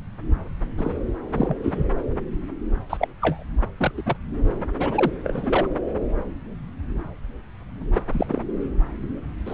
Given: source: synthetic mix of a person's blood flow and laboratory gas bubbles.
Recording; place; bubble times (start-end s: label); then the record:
Doppler ultrasound of blood flow; subclavian vein
0.77-0.95 s: bubbles
1.32-1.57 s: bubbles
1.63-1.85 s: bubbles
2.90-3.08 s: bubbles
3.21-3.43 s: bubbles
3.77-3.92 s: bubbles
3.97-4.03 s: bubbles
4.06-4.16 s: bubbles
4.80-5.11 s: bubbles
5.24-5.68 s: bubbles
7.93-8.01 s: bubbles
8.12-8.43 s: bubbles
9.46-9.53 s: bubbles
From the record:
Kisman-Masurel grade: 233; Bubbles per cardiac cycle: several, 3 to 8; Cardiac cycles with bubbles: 50 to 99%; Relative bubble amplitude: loud (0.450 to 0.775); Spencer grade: 3 (all of the cardiac periods contain showers or single bubble signals, but not dominating or overriding the cardiac motion signals); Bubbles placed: anywhere in the cardiac cycle